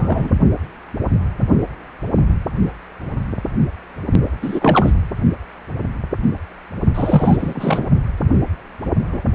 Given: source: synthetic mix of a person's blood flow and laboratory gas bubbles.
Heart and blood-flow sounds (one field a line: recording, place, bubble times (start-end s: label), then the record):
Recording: Doppler ultrasound of blood flow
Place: precordium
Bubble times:
0.00-0.33 s: bubbles
4.42-4.92 s: bubbles
6.94-7.86 s: bubbles
9.12-9.22 s: bubbles
From the record:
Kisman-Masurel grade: 233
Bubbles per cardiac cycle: several, 3 to 8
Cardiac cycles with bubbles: 50 to 99%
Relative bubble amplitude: loud (0.450 to 0.775)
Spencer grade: 3 (all of the cardiac periods contain showers or single bubble signals, but not dominating or overriding the cardiac motion signals)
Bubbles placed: only in the low amplitude regions of the cardiac cycle